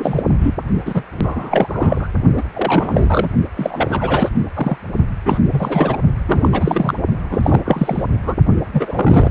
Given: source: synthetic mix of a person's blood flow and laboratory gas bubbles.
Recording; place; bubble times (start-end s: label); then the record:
Doppler ultrasound of blood flow; precordium
0.00-0.23 s: bubbles
0.41-0.54 s: bubbles
0.85-1.04 s: bubbles
1.19-2.08 s: bubbles
2.36-2.43 s: bubbles
2.53-3.29 s: bubbles
3.56-4.29 s: bubbles
4.54-4.77 s: bubbles
5.25-5.39 s: bubbles
5.51-5.97 s: bubbles
6.27-6.48 s: bubbles
6.51-6.95 s: bubbles
7.29-7.60 s: bubbles
7.65-8.03 s: bubbles
8.26-8.36 s: bubbles
8.73-9.31 s: bubbles
From the record:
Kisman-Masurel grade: 343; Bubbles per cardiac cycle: rolling drumbeat, 9 or more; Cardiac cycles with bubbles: 100%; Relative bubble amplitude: loud (0.450 to 0.775); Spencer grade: 3 (all of the cardiac periods contain showers or single bubble signals, but not dominating or overriding the cardiac motion signals); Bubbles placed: only in the low amplitude regions of the cardiac cycle